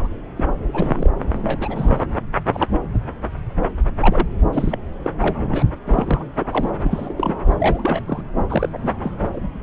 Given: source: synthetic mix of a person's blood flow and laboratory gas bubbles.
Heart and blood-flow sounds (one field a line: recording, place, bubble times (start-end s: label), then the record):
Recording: Doppler ultrasound of blood flow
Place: subclavian vein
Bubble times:
0.00-0.08 s: bubbles
0.37-0.44 s: bubbles
0.67-1.12 s: bubbles
1.44-2.07 s: bubbles
2.53-2.67 s: bubbles
2.93-3.00 s: bubbles
4.00-4.27 s: bubbles
4.53-4.78 s: bubbles
5.03-5.10 s: bubbles
5.20-5.63 s: bubbles
5.86-6.25 s: bubbles
6.39-6.46 s: bubbles
6.51-6.72 s: bubbles
6.82-7.35 s: bubbles
7.50-7.57 s: bubbles
7.60-8.02 s: bubbles
8.07-8.22 s: bubbles
8.39-8.44 s: bubbles
8.50-8.69 s: bubbles
8.72-8.95 s: bubbles
9.02-9.12 s: bubbles
9.33-9.48 s: bubbles
From the record:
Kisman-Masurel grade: 242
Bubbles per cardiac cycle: several, 3 to 8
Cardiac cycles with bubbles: 100%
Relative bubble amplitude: moderate (0.250 to 0.450)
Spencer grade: 3 (all of the cardiac periods contain showers or single bubble signals, but not dominating or overriding the cardiac motion signals)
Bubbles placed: anywhere in the cardiac cycle